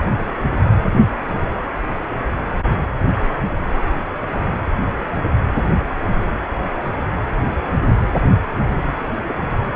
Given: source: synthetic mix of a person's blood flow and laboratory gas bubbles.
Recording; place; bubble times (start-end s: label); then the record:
Doppler ultrasound of blood flow; precordium
9.23-9.53 s: bubbles
From the record:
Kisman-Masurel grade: 111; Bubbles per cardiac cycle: 1 to 2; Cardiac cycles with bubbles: 1 to 10%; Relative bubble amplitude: barely perceptible (0.100 to 0.250); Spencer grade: 1 (occasional bubble signal discernible with the cardiac motion signal, with majority of cardiac periods free of bubbles); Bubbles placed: anywhere in the cardiac cycle